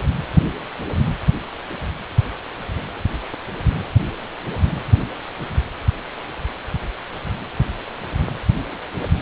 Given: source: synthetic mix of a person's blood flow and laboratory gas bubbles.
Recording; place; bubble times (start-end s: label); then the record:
Doppler ultrasound of blood flow; precordium
no bubbles
From the record:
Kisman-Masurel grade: 000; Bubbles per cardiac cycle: 0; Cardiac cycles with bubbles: 0%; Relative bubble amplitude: no bubbles discernible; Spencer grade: 0 (complete lack of bubble signals)